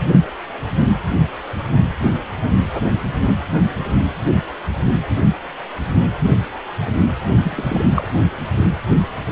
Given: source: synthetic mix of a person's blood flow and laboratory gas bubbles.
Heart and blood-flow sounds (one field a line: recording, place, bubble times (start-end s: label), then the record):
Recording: Doppler ultrasound of blood flow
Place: precordium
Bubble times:
7.43-8.08 s: bubbles
From the record:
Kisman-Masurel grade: 212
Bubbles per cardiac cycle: several, 3 to 8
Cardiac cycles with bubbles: 1 to 10%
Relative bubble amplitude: moderate (0.250 to 0.450)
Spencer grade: 1 (occasional bubble signal discernible with the cardiac motion signal, with majority of cardiac periods free of bubbles)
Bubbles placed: anywhere in the cardiac cycle